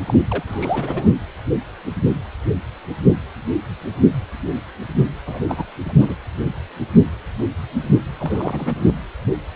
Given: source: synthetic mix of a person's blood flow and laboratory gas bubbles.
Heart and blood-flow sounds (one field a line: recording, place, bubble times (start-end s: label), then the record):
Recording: Doppler ultrasound of blood flow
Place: precordium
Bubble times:
0.06-0.20 s: bubbles
0.30-0.43 s: bubbles
0.47-1.08 s: bubbles
5.27-5.40 s: bubbles
5.49-5.66 s: bubbles
5.85-5.93 s: bubbles
5.98-6.14 s: bubbles
8.17-8.84 s: bubbles
8.88-8.93 s: bubbles
From the record:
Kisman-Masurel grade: 221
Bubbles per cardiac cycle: several, 3 to 8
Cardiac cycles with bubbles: 10 to 50%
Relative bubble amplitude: barely perceptible (0.100 to 0.250)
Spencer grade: 2 (many but less than half of the cardiac periods contain bubble signals, singularly or in groups)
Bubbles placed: anywhere in the cardiac cycle